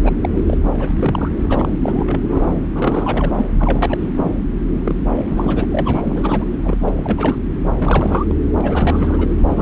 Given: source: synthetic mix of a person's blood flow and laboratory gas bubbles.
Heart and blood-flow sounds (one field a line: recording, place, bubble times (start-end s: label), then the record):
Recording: Doppler ultrasound of blood flow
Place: subclavian vein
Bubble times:
0.03-0.15 s: bubbles
0.21-0.29 s: bubbles
0.32-0.58 s: bubbles
0.79-1.29 s: bubbles
1.39-1.69 s: bubbles
1.81-2.54 s: bubbles
2.75-3.48 s: bubbles
3.58-3.98 s: bubbles
4.01-4.08 s: bubbles
4.15-4.32 s: bubbles
4.84-4.95 s: bubbles
5.06-5.12 s: bubbles
5.16-5.65 s: bubbles
5.71-6.02 s: bubbles
6.04-6.45 s: bubbles
6.64-6.78 s: bubbles
6.81-6.93 s: bubbles
6.96-7.36 s: bubbles
7.79-8.36 s: bubbles
8.44-9.28 s: bubbles
9.49-9.62 s: bubbles
From the record:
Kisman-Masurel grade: 332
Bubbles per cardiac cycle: rolling drumbeat, 9 or more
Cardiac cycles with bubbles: 50 to 99%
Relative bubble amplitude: moderate (0.250 to 0.450)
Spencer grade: 3 (all of the cardiac periods contain showers or single bubble signals, but not dominating or overriding the cardiac motion signals)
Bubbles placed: anywhere in the cardiac cycle